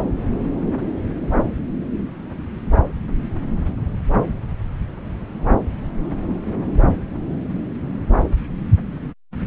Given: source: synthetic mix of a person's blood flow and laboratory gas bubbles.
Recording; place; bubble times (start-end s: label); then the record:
Doppler ultrasound of blood flow; subclavian vein
no bubbles
From the record:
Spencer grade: 0 (complete lack of bubble signals)